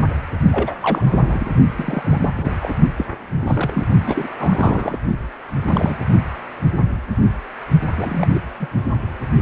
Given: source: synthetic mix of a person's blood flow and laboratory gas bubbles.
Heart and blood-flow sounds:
Doppler ultrasound of blood flow; precordium
0.51-0.72 s: bubbles
0.82-1.51 s: bubbles
1.76-2.31 s: bubbles
2.36-2.53 s: bubbles
2.59-2.75 s: bubbles
2.97-3.05 s: bubbles
3.47-3.87 s: bubbles
4.06-4.28 s: bubbles
4.38-4.98 s: bubbles
5.67-5.97 s: bubbles
7.96-8.27 s: bubbles
8.34-8.39 s: bubbles
8.59-8.68 s: bubbles
From the record:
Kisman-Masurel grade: 232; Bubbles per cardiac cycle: several, 3 to 8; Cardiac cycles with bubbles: 50 to 99%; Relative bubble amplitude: moderate (0.250 to 0.450); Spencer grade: 3 (all of the cardiac periods contain showers or single bubble signals, but not dominating or overriding the cardiac motion signals); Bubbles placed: only in the low amplitude regions of the cardiac cycle

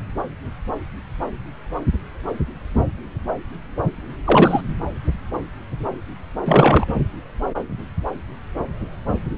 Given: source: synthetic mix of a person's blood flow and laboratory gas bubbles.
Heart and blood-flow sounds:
Doppler ultrasound of blood flow; subclavian vein
4.25-4.61 s: bubbles
6.46-6.86 s: bubbles
From the record:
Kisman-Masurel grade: 213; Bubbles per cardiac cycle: several, 3 to 8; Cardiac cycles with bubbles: 1 to 10%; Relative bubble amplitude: loud (0.450 to 0.775); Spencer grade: 1 (occasional bubble signal discernible with the cardiac motion signal, with majority of cardiac periods free of bubbles); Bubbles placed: anywhere in the cardiac cycle

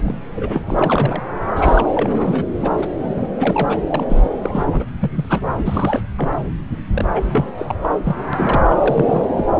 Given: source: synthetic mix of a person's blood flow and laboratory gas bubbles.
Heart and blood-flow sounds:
Doppler ultrasound of blood flow; subclavian vein
0.05-0.15 s: bubbles
0.35-0.61 s: bubbles
0.67-1.21 s: bubbles
1.55-1.86 s: bubbles
1.95-2.45 s: bubbles
2.62-2.71 s: bubbles
2.77-2.87 s: bubbles
3.00-3.29 s: bubbles
3.34-3.80 s: bubbles
3.87-4.05 s: bubbles
4.09-4.29 s: bubbles
4.42-4.65 s: bubbles
4.71-4.85 s: bubbles
4.99-5.11 s: bubbles
5.15-5.25 s: bubbles
5.29-5.40 s: bubbles
5.57-6.01 s: bubbles
6.17-6.29 s: bubbles
6.92-7.08 s: bubbles
7.13-7.22 s: bubbles
7.32-7.46 s: bubbles
7.57-7.75 s: bubbles
7.82-7.89 s: bubbles
8.04-8.16 s: bubbles
8.33-8.66 s: bubbles
8.69-8.77 s: bubbles
8.79-9.26 s: bubbles
9.37-9.45 s: bubbles
From the record:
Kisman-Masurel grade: 342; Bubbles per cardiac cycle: rolling drumbeat, 9 or more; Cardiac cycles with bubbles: 100%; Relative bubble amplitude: moderate (0.250 to 0.450); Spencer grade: 3 (all of the cardiac periods contain showers or single bubble signals, but not dominating or overriding the cardiac motion signals); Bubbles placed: anywhere in the cardiac cycle

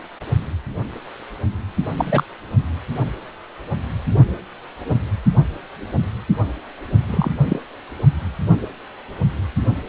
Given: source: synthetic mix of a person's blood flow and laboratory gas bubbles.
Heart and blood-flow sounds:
Doppler ultrasound of blood flow; precordium
1.96-2.24 s: bubbles
7.08-7.30 s: bubbles
7.45-7.60 s: bubbles
From the record:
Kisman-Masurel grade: 123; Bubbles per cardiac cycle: 1 to 2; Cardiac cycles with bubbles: 10 to 50%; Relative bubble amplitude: loud (0.450 to 0.775); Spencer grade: 2 (many but less than half of the cardiac periods contain bubble signals, singularly or in groups); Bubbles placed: only in the low amplitude regions of the cardiac cycle

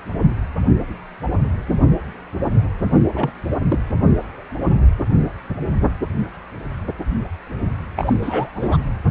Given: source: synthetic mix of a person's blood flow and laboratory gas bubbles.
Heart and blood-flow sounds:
Doppler ultrasound of blood flow; precordium
3.13-3.30 s: bubbles
3.68-3.79 s: bubbles
7.95-8.13 s: bubbles
8.22-8.50 s: bubbles
8.55-8.78 s: bubbles
From the record:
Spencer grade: 2 (many but less than half of the cardiac periods contain bubble signals, singularly or in groups); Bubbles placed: anywhere in the cardiac cycle

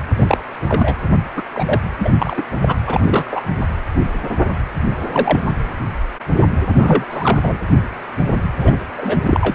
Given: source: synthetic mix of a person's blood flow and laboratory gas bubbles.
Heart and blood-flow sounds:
Doppler ultrasound of blood flow; precordium
0.16-0.38 s: bubbles
0.68-0.95 s: bubbles
1.37-1.43 s: bubbles
1.54-1.81 s: bubbles
1.99-2.10 s: bubbles
2.19-2.43 s: bubbles
2.59-2.75 s: bubbles
2.87-3.00 s: bubbles
3.04-3.41 s: bubbles
5.08-5.44 s: bubbles
6.76-7.04 s: bubbles
7.10-7.40 s: bubbles
7.42-7.58 s: bubbles
8.61-8.76 s: bubbles
8.96-9.18 s: bubbles
9.24-9.54 s: bubbles
From the record:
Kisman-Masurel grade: 232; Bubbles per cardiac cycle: several, 3 to 8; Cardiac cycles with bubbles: 50 to 99%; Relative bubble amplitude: moderate (0.250 to 0.450); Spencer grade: 3 (all of the cardiac periods contain showers or single bubble signals, but not dominating or overriding the cardiac motion signals); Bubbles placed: anywhere in the cardiac cycle

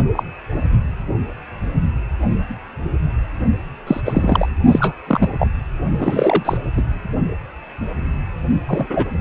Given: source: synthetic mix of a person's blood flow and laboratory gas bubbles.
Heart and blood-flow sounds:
Doppler ultrasound of blood flow; precordium
0.13-0.23 s: bubbles
3.87-4.00 s: bubbles
4.05-4.49 s: bubbles
4.71-4.95 s: bubbles
5.07-5.48 s: bubbles
5.99-6.58 s: bubbles
6.76-6.82 s: bubbles
8.66-8.86 s: bubbles
8.89-9.10 s: bubbles
From the record:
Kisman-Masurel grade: 233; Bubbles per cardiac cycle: several, 3 to 8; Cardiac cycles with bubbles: 50 to 99%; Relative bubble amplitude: loud (0.450 to 0.775); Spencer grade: 3 (all of the cardiac periods contain showers or single bubble signals, but not dominating or overriding the cardiac motion signals); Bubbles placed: only in the low amplitude regions of the cardiac cycle

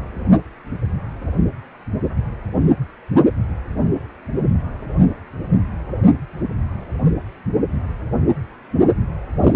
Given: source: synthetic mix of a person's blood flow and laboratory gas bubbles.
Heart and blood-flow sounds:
Doppler ultrasound of blood flow; precordium
9.41-9.56 s: bubbles
From the record:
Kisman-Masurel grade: 213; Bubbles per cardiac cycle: several, 3 to 8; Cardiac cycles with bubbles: 1 to 10%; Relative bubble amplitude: loud (0.450 to 0.775); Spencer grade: 1 (occasional bubble signal discernible with the cardiac motion signal, with majority of cardiac periods free of bubbles); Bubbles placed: only in the low amplitude regions of the cardiac cycle

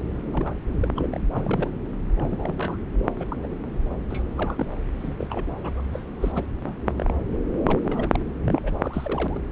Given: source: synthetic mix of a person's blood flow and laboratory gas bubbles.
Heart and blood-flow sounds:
Doppler ultrasound of blood flow; subclavian vein
0.33-0.53 s: bubbles
0.81-0.88 s: bubbles
0.96-1.06 s: bubbles
1.11-1.20 s: bubbles
1.31-1.72 s: bubbles
2.16-2.77 s: bubbles
2.98-3.05 s: bubbles
3.18-3.25 s: bubbles
3.28-3.37 s: bubbles
3.42-3.48 s: bubbles
4.10-4.25 s: bubbles
4.36-4.67 s: bubbles
4.99-5.16 s: bubbles
5.20-5.27 s: bubbles
5.29-5.83 s: bubbles
5.92-6.04 s: bubbles
6.21-6.44 s: bubbles
6.64-6.74 s: bubbles
6.86-6.92 s: bubbles
6.96-7.14 s: bubbles
7.65-7.80 s: bubbles
7.83-8.20 s: bubbles
8.44-9.40 s: bubbles
From the record:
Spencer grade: 3 (all of the cardiac periods contain showers or single bubble signals, but not dominating or overriding the cardiac motion signals); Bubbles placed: anywhere in the cardiac cycle

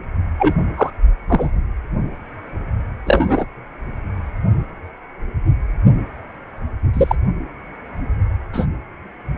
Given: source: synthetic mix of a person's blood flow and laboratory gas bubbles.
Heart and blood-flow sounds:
Doppler ultrasound of blood flow; precordium
0.38-0.52 s: bubbles
0.77-0.90 s: bubbles
1.28-1.61 s: bubbles
3.06-3.45 s: bubbles
6.94-7.16 s: bubbles
8.53-8.66 s: bubbles
From the record:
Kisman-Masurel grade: 123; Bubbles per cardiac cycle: 1 to 2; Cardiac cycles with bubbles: 10 to 50%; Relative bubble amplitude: loud (0.450 to 0.775); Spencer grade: 2 (many but less than half of the cardiac periods contain bubble signals, singularly or in groups); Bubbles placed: anywhere in the cardiac cycle

